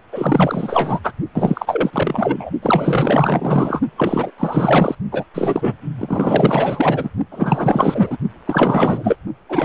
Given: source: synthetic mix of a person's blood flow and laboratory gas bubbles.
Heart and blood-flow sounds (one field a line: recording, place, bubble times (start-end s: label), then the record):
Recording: Doppler ultrasound of blood flow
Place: precordium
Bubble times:
0.12-0.99 s: bubbles
1.03-1.11 s: bubbles
1.34-2.50 s: bubbles
2.62-3.81 s: bubbles
3.97-4.32 s: bubbles
4.38-4.95 s: bubbles
5.11-5.25 s: bubbles
5.34-5.74 s: bubbles
5.99-7.10 s: bubbles
7.31-8.18 s: bubbles
8.46-9.17 s: bubbles
9.49-9.65 s: bubbles
From the record:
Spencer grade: 4 (maximum detectable bubble signal sounding continuously throughout systole and diastole of every cardiac period, and overriding the amplitude of the normal cardiac signals)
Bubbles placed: only in the low amplitude regions of the cardiac cycle